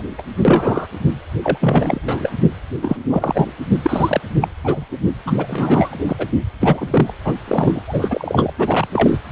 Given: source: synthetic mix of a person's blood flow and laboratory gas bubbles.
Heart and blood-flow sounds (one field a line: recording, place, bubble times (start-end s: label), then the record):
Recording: Doppler ultrasound of blood flow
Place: precordium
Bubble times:
0.00-0.02 s: bubbles
0.18-0.23 s: bubbles
0.45-0.87 s: bubbles
1.42-1.58 s: bubbles
1.60-2.00 s: bubbles
2.08-2.31 s: bubbles
2.81-2.97 s: bubbles
3.10-3.52 s: bubbles
3.83-4.21 s: bubbles
4.41-4.48 s: bubbles
4.63-4.85 s: bubbles
4.91-4.96 s: bubbles
5.25-6.16 s: bubbles
6.19-6.26 s: bubbles
6.60-7.14 s: bubbles
7.24-7.35 s: bubbles
7.48-7.82 s: bubbles
7.88-8.52 s: bubbles
8.58-8.88 s: bubbles
8.93-9.21 s: bubbles
9.29-9.32 s: bubbles
From the record:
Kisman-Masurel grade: 232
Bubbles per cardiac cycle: several, 3 to 8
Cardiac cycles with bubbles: 50 to 99%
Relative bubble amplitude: moderate (0.250 to 0.450)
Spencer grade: 3 (all of the cardiac periods contain showers or single bubble signals, but not dominating or overriding the cardiac motion signals)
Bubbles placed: anywhere in the cardiac cycle